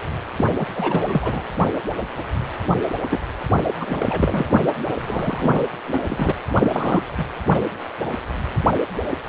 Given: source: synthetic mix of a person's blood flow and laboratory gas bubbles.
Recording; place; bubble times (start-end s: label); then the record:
Doppler ultrasound of blood flow; precordium
0.38-0.45 s: bubbles
0.59-0.65 s: bubbles
0.76-1.43 s: bubbles
3.10-3.22 s: bubbles
3.80-4.60 s: bubbles
5.00-5.65 s: bubbles
5.87-6.00 s: bubbles
6.07-6.32 s: bubbles
6.49-7.04 s: bubbles
7.17-7.25 s: bubbles
From the record:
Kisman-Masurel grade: 332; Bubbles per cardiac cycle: rolling drumbeat, 9 or more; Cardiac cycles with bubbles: 50 to 99%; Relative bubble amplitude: moderate (0.250 to 0.450); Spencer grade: 3 (all of the cardiac periods contain showers or single bubble signals, but not dominating or overriding the cardiac motion signals); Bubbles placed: anywhere in the cardiac cycle